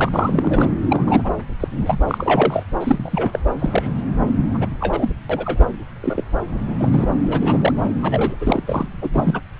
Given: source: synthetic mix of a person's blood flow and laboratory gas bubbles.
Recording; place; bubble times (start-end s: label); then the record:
Doppler ultrasound of blood flow; subclavian vein
0.00-0.68 s: bubbles
0.90-1.32 s: bubbles
1.60-1.68 s: bubbles
1.71-1.99 s: bubbles
2.07-2.63 s: bubbles
2.79-3.39 s: bubbles
3.59-4.03 s: bubbles
4.54-4.67 s: bubbles
4.80-5.10 s: bubbles
5.29-5.74 s: bubbles
6.01-6.23 s: bubbles
6.49-7.06 s: bubbles
7.16-7.72 s: bubbles
7.82-7.91 s: bubbles
8.02-8.35 s: bubbles
8.41-8.63 s: bubbles
8.67-8.89 s: bubbles
9.02-9.10 s: bubbles
9.12-9.41 s: bubbles
From the record:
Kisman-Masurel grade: 242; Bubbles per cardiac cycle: several, 3 to 8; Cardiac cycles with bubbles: 100%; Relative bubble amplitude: moderate (0.250 to 0.450); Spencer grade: 3 (all of the cardiac periods contain showers or single bubble signals, but not dominating or overriding the cardiac motion signals); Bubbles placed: anywhere in the cardiac cycle